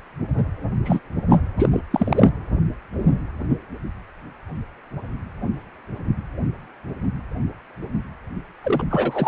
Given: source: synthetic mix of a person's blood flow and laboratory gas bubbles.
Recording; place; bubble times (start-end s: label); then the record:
Doppler ultrasound of blood flow; precordium
0.84-1.00 s: bubbles
1.29-1.39 s: bubbles
1.57-1.81 s: bubbles
1.90-2.29 s: bubbles
8.63-8.84 s: bubbles
8.90-9.28 s: bubbles
From the record:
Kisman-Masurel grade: 223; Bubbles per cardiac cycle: several, 3 to 8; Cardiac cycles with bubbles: 10 to 50%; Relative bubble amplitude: loud (0.450 to 0.775); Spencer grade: 2 (many but less than half of the cardiac periods contain bubble signals, singularly or in groups); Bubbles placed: anywhere in the cardiac cycle